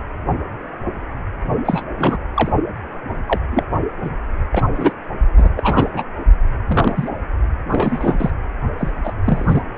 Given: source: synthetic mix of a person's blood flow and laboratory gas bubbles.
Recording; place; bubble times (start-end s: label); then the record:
Doppler ultrasound of blood flow; precordium
1.65-1.84 s: bubbles
1.99-2.18 s: bubbles
2.36-2.52 s: bubbles
3.28-3.40 s: bubbles
3.52-3.67 s: bubbles
4.02-4.10 s: bubbles
4.52-4.62 s: bubbles
4.75-4.92 s: bubbles
5.37-5.50 s: bubbles
5.56-6.04 s: bubbles
6.67-7.08 s: bubbles
7.70-8.30 s: bubbles
8.78-8.92 s: bubbles
9.04-9.12 s: bubbles
9.25-9.62 s: bubbles
From the record:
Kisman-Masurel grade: 232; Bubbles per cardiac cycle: several, 3 to 8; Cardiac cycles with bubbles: 50 to 99%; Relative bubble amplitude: moderate (0.250 to 0.450); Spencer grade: 3 (all of the cardiac periods contain showers or single bubble signals, but not dominating or overriding the cardiac motion signals); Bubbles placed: only in the low amplitude regions of the cardiac cycle